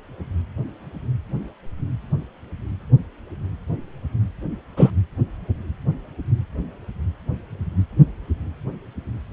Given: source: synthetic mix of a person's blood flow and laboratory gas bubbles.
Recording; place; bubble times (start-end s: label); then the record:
Doppler ultrasound of blood flow; precordium
4.76-4.91 s: bubbles
From the record:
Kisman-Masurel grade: 123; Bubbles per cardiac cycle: 1 to 2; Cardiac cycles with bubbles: 10 to 50%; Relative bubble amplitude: loud (0.450 to 0.775); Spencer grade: 2 (many but less than half of the cardiac periods contain bubble signals, singularly or in groups); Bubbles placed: anywhere in the cardiac cycle